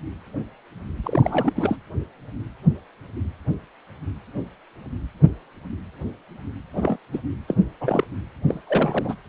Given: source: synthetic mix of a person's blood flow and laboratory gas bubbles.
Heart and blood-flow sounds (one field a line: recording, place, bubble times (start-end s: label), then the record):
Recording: Doppler ultrasound of blood flow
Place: precordium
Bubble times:
1.03-1.53 s: bubbles
1.56-1.76 s: bubbles
6.73-6.97 s: bubbles
7.12-7.19 s: bubbles
7.48-7.55 s: bubbles
7.80-8.04 s: bubbles
8.48-8.61 s: bubbles
8.67-9.14 s: bubbles
From the record:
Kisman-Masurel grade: 222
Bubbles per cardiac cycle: several, 3 to 8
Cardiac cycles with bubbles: 10 to 50%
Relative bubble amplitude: moderate (0.250 to 0.450)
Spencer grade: 2 (many but less than half of the cardiac periods contain bubble signals, singularly or in groups)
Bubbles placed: anywhere in the cardiac cycle